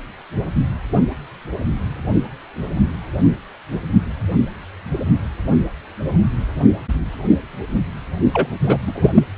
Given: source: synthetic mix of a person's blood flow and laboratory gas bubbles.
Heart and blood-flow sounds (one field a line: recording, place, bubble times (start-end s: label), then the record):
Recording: Doppler ultrasound of blood flow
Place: precordium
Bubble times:
8.33-8.47 s: bubbles
8.60-8.78 s: bubbles
8.87-8.92 s: bubbles
8.95-9.24 s: bubbles
From the record:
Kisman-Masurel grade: 223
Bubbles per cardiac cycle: several, 3 to 8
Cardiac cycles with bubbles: 10 to 50%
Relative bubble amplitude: loud (0.450 to 0.775)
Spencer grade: 2 (many but less than half of the cardiac periods contain bubble signals, singularly or in groups)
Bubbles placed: only in the low amplitude regions of the cardiac cycle